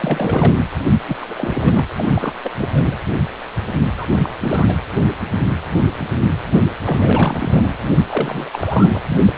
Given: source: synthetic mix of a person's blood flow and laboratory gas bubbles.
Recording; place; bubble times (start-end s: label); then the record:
Doppler ultrasound of blood flow; precordium
0.00-0.54 s: bubbles
1.08-1.17 s: bubbles
1.21-1.88 s: bubbles
1.96-2.33 s: bubbles
2.44-2.52 s: bubbles
2.58-2.69 s: bubbles
2.72-2.95 s: bubbles
3.97-4.06 s: bubbles
4.21-4.31 s: bubbles
4.41-4.77 s: bubbles
6.84-7.77 s: bubbles
8.10-8.49 s: bubbles
8.53-9.07 s: bubbles
9.10-9.33 s: bubbles
From the record:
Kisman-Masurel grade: 332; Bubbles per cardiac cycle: rolling drumbeat, 9 or more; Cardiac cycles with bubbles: 50 to 99%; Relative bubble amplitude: moderate (0.250 to 0.450); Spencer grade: 3 (all of the cardiac periods contain showers or single bubble signals, but not dominating or overriding the cardiac motion signals); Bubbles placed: anywhere in the cardiac cycle